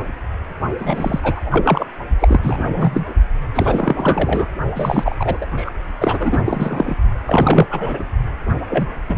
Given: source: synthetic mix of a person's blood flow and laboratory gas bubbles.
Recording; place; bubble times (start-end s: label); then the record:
Doppler ultrasound of blood flow; precordium
0.78-1.20 s: bubbles
1.23-1.85 s: bubbles
2.19-3.06 s: bubbles
3.54-4.48 s: bubbles
4.75-5.16 s: bubbles
5.19-5.38 s: bubbles
5.41-5.46 s: bubbles
5.56-5.71 s: bubbles
6.00-6.96 s: bubbles
7.26-7.65 s: bubbles
7.71-8.04 s: bubbles
8.69-8.87 s: bubbles
9.07-9.18 s: bubbles
From the record:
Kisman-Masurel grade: 333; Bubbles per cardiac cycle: rolling drumbeat, 9 or more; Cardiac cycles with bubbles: 50 to 99%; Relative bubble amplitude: loud (0.450 to 0.775); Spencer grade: 3 (all of the cardiac periods contain showers or single bubble signals, but not dominating or overriding the cardiac motion signals); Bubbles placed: only in the low amplitude regions of the cardiac cycle